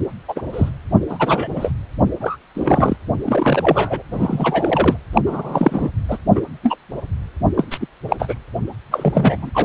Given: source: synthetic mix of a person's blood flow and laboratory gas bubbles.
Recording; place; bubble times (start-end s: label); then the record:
Doppler ultrasound of blood flow; precordium
0.28-0.42 s: bubbles
0.52-0.70 s: bubbles
1.09-1.48 s: bubbles
1.55-1.71 s: bubbles
2.21-2.36 s: bubbles
2.54-2.96 s: bubbles
3.25-4.02 s: bubbles
4.12-4.97 s: bubbles
5.13-5.21 s: bubbles
5.26-5.89 s: bubbles
6.08-6.17 s: bubbles
6.35-6.42 s: bubbles
6.63-6.76 s: bubbles
7.56-7.67 s: bubbles
7.71-7.78 s: bubbles
7.80-7.87 s: bubbles
8.08-8.16 s: bubbles
8.19-8.35 s: bubbles
8.91-9.51 s: bubbles
9.54-9.65 s: bubbles
From the record:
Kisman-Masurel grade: 243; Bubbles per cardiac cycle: several, 3 to 8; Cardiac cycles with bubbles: 100%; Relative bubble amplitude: loud (0.450 to 0.775); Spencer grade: 3 (all of the cardiac periods contain showers or single bubble signals, but not dominating or overriding the cardiac motion signals); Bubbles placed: anywhere in the cardiac cycle